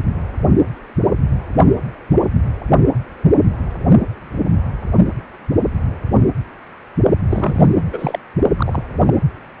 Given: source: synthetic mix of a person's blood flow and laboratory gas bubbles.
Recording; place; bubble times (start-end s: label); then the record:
Doppler ultrasound of blood flow; precordium
7.29-7.86 s: bubbles
7.92-8.19 s: bubbles
8.57-8.83 s: bubbles
9.02-9.22 s: bubbles
From the record:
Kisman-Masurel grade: 223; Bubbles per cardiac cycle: several, 3 to 8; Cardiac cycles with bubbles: 10 to 50%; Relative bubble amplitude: loud (0.450 to 0.775); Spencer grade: 2 (many but less than half of the cardiac periods contain bubble signals, singularly or in groups); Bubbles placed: only in the low amplitude regions of the cardiac cycle